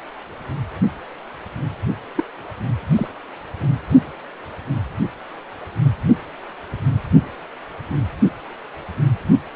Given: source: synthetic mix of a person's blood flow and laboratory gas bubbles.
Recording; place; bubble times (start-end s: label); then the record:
Doppler ultrasound of blood flow; precordium
2.15-2.24 s: bubbles
2.95-3.08 s: bubbles
From the record:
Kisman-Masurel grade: 122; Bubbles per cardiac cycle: 1 to 2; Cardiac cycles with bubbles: 10 to 50%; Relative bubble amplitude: moderate (0.250 to 0.450); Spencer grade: 2 (many but less than half of the cardiac periods contain bubble signals, singularly or in groups); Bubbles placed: only in the low amplitude regions of the cardiac cycle